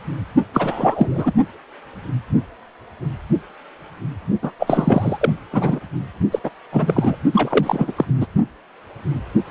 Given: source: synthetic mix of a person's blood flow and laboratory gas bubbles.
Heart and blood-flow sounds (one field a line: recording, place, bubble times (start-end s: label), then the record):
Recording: Doppler ultrasound of blood flow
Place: precordium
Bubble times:
0.54-1.33 s: bubbles
4.42-4.51 s: bubbles
4.59-5.33 s: bubbles
5.52-5.79 s: bubbles
6.31-6.39 s: bubbles
6.44-6.50 s: bubbles
6.71-7.16 s: bubbles
7.31-8.05 s: bubbles
8.20-8.27 s: bubbles
From the record:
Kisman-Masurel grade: 333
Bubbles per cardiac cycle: rolling drumbeat, 9 or more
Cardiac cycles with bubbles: 50 to 99%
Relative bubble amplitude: loud (0.450 to 0.775)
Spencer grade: 3 (all of the cardiac periods contain showers or single bubble signals, but not dominating or overriding the cardiac motion signals)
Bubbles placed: only in the low amplitude regions of the cardiac cycle